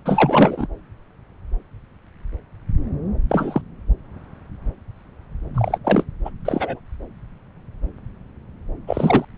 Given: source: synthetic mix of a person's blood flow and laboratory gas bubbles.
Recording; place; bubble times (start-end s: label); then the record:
Doppler ultrasound of blood flow; subclavian vein
0.05-0.67 s: bubbles
3.29-3.62 s: bubbles
5.54-5.79 s: bubbles
5.84-6.04 s: bubbles
6.25-6.30 s: bubbles
6.45-6.80 s: bubbles
8.87-9.25 s: bubbles
From the record:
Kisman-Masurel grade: 223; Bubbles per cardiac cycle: several, 3 to 8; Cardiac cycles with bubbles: 10 to 50%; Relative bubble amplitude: loud (0.450 to 0.775); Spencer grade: 2 (many but less than half of the cardiac periods contain bubble signals, singularly or in groups); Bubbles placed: anywhere in the cardiac cycle